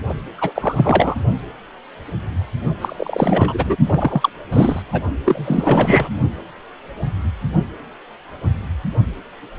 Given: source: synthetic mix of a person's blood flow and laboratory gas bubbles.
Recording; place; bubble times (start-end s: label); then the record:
Doppler ultrasound of blood flow; precordium
0.08-0.14 s: bubbles
0.37-0.52 s: bubbles
0.55-1.16 s: bubbles
2.81-3.76 s: bubbles
3.85-4.29 s: bubbles
4.52-4.82 s: bubbles
4.92-5.02 s: bubbles
5.25-6.08 s: bubbles
From the record:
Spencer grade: 3 (all of the cardiac periods contain showers or single bubble signals, but not dominating or overriding the cardiac motion signals); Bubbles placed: only in the low amplitude regions of the cardiac cycle